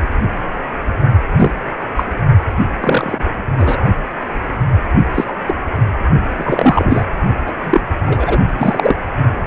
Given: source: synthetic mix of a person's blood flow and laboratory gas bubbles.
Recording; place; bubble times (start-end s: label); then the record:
Doppler ultrasound of blood flow; precordium
1.36-1.51 s: bubbles
1.97-2.04 s: bubbles
2.80-3.25 s: bubbles
3.56-3.77 s: bubbles
5.14-5.25 s: bubbles
5.27-5.33 s: bubbles
5.47-5.54 s: bubbles
6.37-7.04 s: bubbles
7.46-7.52 s: bubbles
7.63-7.81 s: bubbles
8.04-8.40 s: bubbles
8.57-8.96 s: bubbles
From the record:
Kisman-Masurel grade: 233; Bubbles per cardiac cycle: several, 3 to 8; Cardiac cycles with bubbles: 50 to 99%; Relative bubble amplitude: loud (0.450 to 0.775); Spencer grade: 3 (all of the cardiac periods contain showers or single bubble signals, but not dominating or overriding the cardiac motion signals); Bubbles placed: only in the low amplitude regions of the cardiac cycle